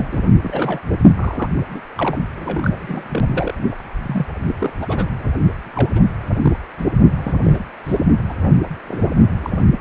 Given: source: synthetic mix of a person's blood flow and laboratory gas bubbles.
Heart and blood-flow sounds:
Doppler ultrasound of blood flow; precordium
0.00-0.07 s: bubbles
0.11-0.19 s: bubbles
0.42-0.80 s: bubbles
1.17-1.48 s: bubbles
1.55-1.81 s: bubbles
1.97-2.18 s: bubbles
2.37-3.54 s: bubbles
3.71-3.76 s: bubbles
4.02-4.26 s: bubbles
4.47-4.54 s: bubbles
4.58-4.73 s: bubbles
4.81-5.09 s: bubbles
5.19-5.29 s: bubbles
5.75-5.89 s: bubbles
5.94-6.00 s: bubbles
6.42-6.58 s: bubbles
6.78-6.84 s: bubbles
7.17-7.33 s: bubbles
7.43-7.63 s: bubbles
7.84-8.04 s: bubbles
8.29-8.33 s: bubbles
8.88-9.02 s: bubbles
9.42-9.50 s: bubbles
9.79-9.81 s: bubbles
From the record:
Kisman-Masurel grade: 242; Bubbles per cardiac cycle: several, 3 to 8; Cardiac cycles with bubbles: 100%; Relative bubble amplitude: moderate (0.250 to 0.450); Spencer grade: 3 (all of the cardiac periods contain showers or single bubble signals, but not dominating or overriding the cardiac motion signals); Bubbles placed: only in the low amplitude regions of the cardiac cycle

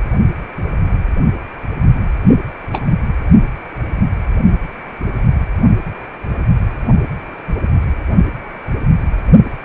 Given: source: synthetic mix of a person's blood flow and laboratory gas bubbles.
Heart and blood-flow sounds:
Doppler ultrasound of blood flow; precordium
2.28-2.37 s: bubbles
2.73-2.81 s: bubbles
From the record:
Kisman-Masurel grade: 113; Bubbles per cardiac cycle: 1 to 2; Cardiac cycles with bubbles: 1 to 10%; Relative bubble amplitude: loud (0.450 to 0.775); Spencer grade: 1 (occasional bubble signal discernible with the cardiac motion signal, with majority of cardiac periods free of bubbles); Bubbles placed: only in the low amplitude regions of the cardiac cycle

